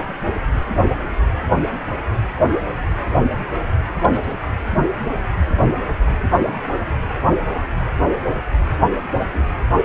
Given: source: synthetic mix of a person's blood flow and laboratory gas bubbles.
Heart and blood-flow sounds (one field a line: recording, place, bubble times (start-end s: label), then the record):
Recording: Doppler ultrasound of blood flow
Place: precordium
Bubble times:
1.51-1.68 s: bubbles
4.00-4.34 s: bubbles
5.96-6.17 s: bubbles
9.20-9.26 s: bubbles
9.29-9.45 s: bubbles
From the record:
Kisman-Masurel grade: 121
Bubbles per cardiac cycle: 1 to 2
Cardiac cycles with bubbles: 10 to 50%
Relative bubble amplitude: barely perceptible (0.100 to 0.250)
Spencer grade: 2 (many but less than half of the cardiac periods contain bubble signals, singularly or in groups)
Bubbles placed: anywhere in the cardiac cycle